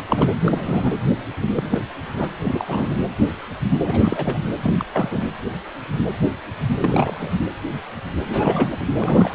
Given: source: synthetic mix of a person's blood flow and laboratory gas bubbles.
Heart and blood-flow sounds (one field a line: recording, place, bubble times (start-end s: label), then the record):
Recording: Doppler ultrasound of blood flow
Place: precordium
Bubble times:
0.00-0.04 s: bubbles
0.07-0.34 s: bubbles
0.39-0.98 s: bubbles
1.39-1.82 s: bubbles
2.14-2.27 s: bubbles
2.44-2.97 s: bubbles
3.85-4.38 s: bubbles
4.62-4.74 s: bubbles
4.78-4.85 s: bubbles
4.92-5.31 s: bubbles
6.78-7.31 s: bubbles
7.38-7.46 s: bubbles
8.24-8.79 s: bubbles
8.97-9.35 s: bubbles
From the record:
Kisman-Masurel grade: 332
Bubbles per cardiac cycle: rolling drumbeat, 9 or more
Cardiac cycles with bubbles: 50 to 99%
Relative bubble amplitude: moderate (0.250 to 0.450)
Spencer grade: 3 (all of the cardiac periods contain showers or single bubble signals, but not dominating or overriding the cardiac motion signals)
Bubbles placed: anywhere in the cardiac cycle